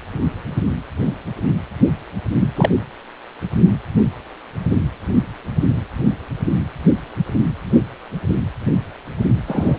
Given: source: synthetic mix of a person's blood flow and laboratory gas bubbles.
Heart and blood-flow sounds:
Doppler ultrasound of blood flow; precordium
2.40-2.48 s: bubbles
2.56-2.71 s: bubbles
9.47-9.78 s: bubbles
From the record:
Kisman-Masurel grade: 223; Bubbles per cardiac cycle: several, 3 to 8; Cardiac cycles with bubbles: 10 to 50%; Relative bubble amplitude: loud (0.450 to 0.775); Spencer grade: 2 (many but less than half of the cardiac periods contain bubble signals, singularly or in groups); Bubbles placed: anywhere in the cardiac cycle

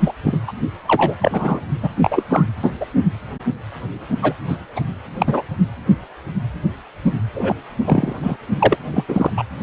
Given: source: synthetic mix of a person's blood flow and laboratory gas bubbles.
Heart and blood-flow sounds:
Doppler ultrasound of blood flow; precordium
0.00-0.12 s: bubbles
0.24-0.38 s: bubbles
0.47-0.52 s: bubbles
0.87-1.15 s: bubbles
1.21-1.61 s: bubbles
1.82-1.89 s: bubbles
2.02-2.23 s: bubbles
2.29-2.45 s: bubbles
2.62-2.70 s: bubbles
2.80-2.85 s: bubbles
4.22-4.33 s: bubbles
4.49-4.57 s: bubbles
4.75-4.80 s: bubbles
5.18-5.42 s: bubbles
7.34-7.54 s: bubbles
7.85-8.12 s: bubbles
8.23-8.37 s: bubbles
8.60-8.77 s: bubbles
8.93-9.04 s: bubbles
9.08-9.30 s: bubbles
9.37-9.43 s: bubbles
From the record:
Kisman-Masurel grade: 233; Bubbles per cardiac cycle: several, 3 to 8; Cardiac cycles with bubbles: 50 to 99%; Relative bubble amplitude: loud (0.450 to 0.775); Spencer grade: 3 (all of the cardiac periods contain showers or single bubble signals, but not dominating or overriding the cardiac motion signals); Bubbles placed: only in the low amplitude regions of the cardiac cycle

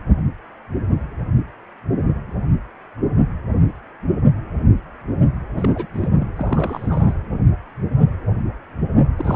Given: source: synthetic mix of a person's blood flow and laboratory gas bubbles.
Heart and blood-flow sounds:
Doppler ultrasound of blood flow; precordium
5.57-5.69 s: bubbles
5.74-5.86 s: bubbles
5.94-6.08 s: bubbles
6.17-6.29 s: bubbles
6.38-7.14 s: bubbles
9.16-9.36 s: bubbles
From the record:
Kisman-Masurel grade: 221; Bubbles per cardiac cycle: several, 3 to 8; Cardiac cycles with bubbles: 10 to 50%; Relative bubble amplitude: barely perceptible (0.100 to 0.250); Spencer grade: 2 (many but less than half of the cardiac periods contain bubble signals, singularly or in groups); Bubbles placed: anywhere in the cardiac cycle

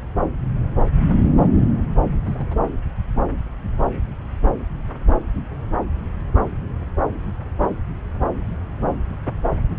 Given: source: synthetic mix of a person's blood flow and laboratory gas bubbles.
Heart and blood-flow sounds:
Doppler ultrasound of blood flow; subclavian vein
2.26-2.35 s: bubbles
2.38-2.56 s: bubbles
From the record:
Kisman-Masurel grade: 111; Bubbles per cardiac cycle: 1 to 2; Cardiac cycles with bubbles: 1 to 10%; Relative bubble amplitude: barely perceptible (0.100 to 0.250); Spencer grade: 1 (occasional bubble signal discernible with the cardiac motion signal, with majority of cardiac periods free of bubbles); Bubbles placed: anywhere in the cardiac cycle

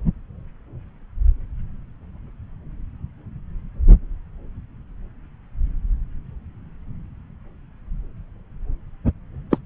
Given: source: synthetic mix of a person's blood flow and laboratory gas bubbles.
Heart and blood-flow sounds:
Doppler ultrasound of blood flow; subclavian vein
9.51-9.58 s: bubbles
From the record:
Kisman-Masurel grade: 112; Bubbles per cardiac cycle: 1 to 2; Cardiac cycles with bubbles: 1 to 10%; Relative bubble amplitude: moderate (0.250 to 0.450); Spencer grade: 1 (occasional bubble signal discernible with the cardiac motion signal, with majority of cardiac periods free of bubbles); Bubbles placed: anywhere in the cardiac cycle

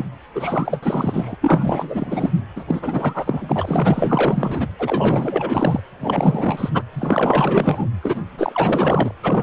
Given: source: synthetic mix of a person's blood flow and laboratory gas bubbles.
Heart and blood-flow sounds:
Doppler ultrasound of blood flow; precordium
0.00-0.04 s: bubbles
0.34-0.80 s: bubbles
0.83-1.35 s: bubbles
1.42-2.31 s: bubbles
2.56-2.64 s: bubbles
2.67-4.67 s: bubbles
4.79-5.80 s: bubbles
6.00-6.70 s: bubbles
6.74-6.83 s: bubbles
6.92-7.87 s: bubbles
8.03-8.21 s: bubbles
8.38-9.12 s: bubbles
9.23-9.43 s: bubbles
From the record:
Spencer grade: 4 (maximum detectable bubble signal sounding continuously throughout systole and diastole of every cardiac period, and overriding the amplitude of the normal cardiac signals); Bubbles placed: anywhere in the cardiac cycle

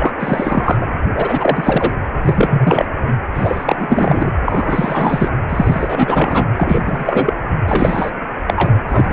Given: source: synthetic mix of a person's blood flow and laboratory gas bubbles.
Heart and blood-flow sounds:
Doppler ultrasound of blood flow; precordium
0.00-0.12 s: bubbles
0.19-0.85 s: bubbles
1.14-1.93 s: bubbles
2.22-2.85 s: bubbles
3.34-4.32 s: bubbles
4.45-5.31 s: bubbles
5.49-6.46 s: bubbles
6.57-7.33 s: bubbles
7.66-8.11 s: bubbles
8.46-8.80 s: bubbles
8.88-9.13 s: bubbles
From the record:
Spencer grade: 3 (all of the cardiac periods contain showers or single bubble signals, but not dominating or overriding the cardiac motion signals); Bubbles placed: anywhere in the cardiac cycle

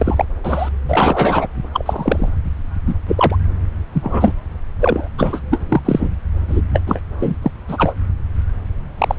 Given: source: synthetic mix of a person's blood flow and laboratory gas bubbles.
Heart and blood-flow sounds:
Doppler ultrasound of blood flow; subclavian vein
0.00-0.25 s: bubbles
0.43-0.69 s: bubbles
0.88-1.48 s: bubbles
1.73-2.29 s: bubbles
2.85-2.94 s: bubbles
3.07-3.35 s: bubbles
3.92-4.32 s: bubbles
4.79-5.08 s: bubbles
5.17-5.41 s: bubbles
5.50-5.61 s: bubbles
5.68-5.81 s: bubbles
5.85-6.09 s: bubbles
6.47-6.62 s: bubbles
6.73-6.82 s: bubbles
6.87-7.01 s: bubbles
7.20-7.37 s: bubbles
7.42-7.51 s: bubbles
7.67-7.94 s: bubbles
8.98-9.15 s: bubbles
From the record:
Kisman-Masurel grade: 243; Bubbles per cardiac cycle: several, 3 to 8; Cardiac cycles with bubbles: 100%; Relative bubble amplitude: loud (0.450 to 0.775); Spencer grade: 3 (all of the cardiac periods contain showers or single bubble signals, but not dominating or overriding the cardiac motion signals); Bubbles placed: anywhere in the cardiac cycle

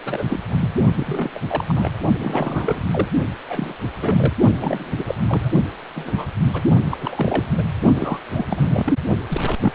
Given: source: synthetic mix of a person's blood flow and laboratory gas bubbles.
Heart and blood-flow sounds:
Doppler ultrasound of blood flow; precordium
0.05-0.24 s: bubbles
0.29-0.40 s: bubbles
0.49-0.72 s: bubbles
0.96-1.31 s: bubbles
1.35-1.39 s: bubbles
1.48-1.65 s: bubbles
1.68-1.92 s: bubbles
2.17-2.80 s: bubbles
2.90-3.07 s: bubbles
3.48-3.73 s: bubbles
4.01-4.33 s: bubbles
4.60-4.91 s: bubbles
4.97-5.14 s: bubbles
5.27-5.50 s: bubbles
5.96-6.25 s: bubbles
6.53-6.61 s: bubbles
6.91-6.97 s: bubbles
7.01-7.46 s: bubbles
7.58-7.63 s: bubbles
7.94-8.46 s: bubbles
8.50-8.94 s: bubbles
9.28-9.55 s: bubbles
9.60-9.72 s: bubbles
From the record:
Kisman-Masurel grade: 342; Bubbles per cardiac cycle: rolling drumbeat, 9 or more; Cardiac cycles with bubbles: 100%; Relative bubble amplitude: moderate (0.250 to 0.450); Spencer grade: 3 (all of the cardiac periods contain showers or single bubble signals, but not dominating or overriding the cardiac motion signals); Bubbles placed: only in the low amplitude regions of the cardiac cycle

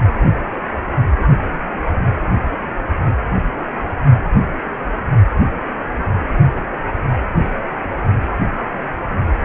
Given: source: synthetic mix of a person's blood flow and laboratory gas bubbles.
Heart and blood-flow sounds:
Doppler ultrasound of blood flow; precordium
9.42-9.45 s: bubbles
From the record:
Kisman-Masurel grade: 123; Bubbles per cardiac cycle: 1 to 2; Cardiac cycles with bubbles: 10 to 50%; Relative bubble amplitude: loud (0.450 to 0.775); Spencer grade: 2 (many but less than half of the cardiac periods contain bubble signals, singularly or in groups); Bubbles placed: only in the low amplitude regions of the cardiac cycle

